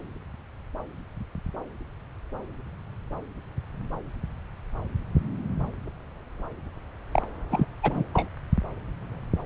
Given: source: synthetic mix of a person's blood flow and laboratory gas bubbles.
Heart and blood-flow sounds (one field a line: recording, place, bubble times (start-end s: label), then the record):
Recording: Doppler ultrasound of blood flow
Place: subclavian vein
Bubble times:
7.12-7.22 s: bubbles
7.51-7.66 s: bubbles
7.82-8.04 s: bubbles
8.13-8.29 s: bubbles
From the record:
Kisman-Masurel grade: 212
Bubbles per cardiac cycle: several, 3 to 8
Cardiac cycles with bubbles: 1 to 10%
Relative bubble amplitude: moderate (0.250 to 0.450)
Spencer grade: 1 (occasional bubble signal discernible with the cardiac motion signal, with majority of cardiac periods free of bubbles)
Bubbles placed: anywhere in the cardiac cycle